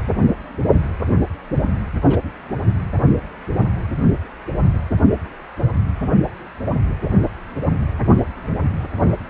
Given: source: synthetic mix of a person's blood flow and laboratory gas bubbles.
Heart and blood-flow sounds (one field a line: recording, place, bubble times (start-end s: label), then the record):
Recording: Doppler ultrasound of blood flow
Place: precordium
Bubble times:
2.06-2.19 s: bubbles
7.04-7.12 s: bubbles
From the record:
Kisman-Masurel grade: 121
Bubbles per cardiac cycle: 1 to 2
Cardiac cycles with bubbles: 10 to 50%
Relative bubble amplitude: barely perceptible (0.100 to 0.250)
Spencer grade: 2 (many but less than half of the cardiac periods contain bubble signals, singularly or in groups)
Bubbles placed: anywhere in the cardiac cycle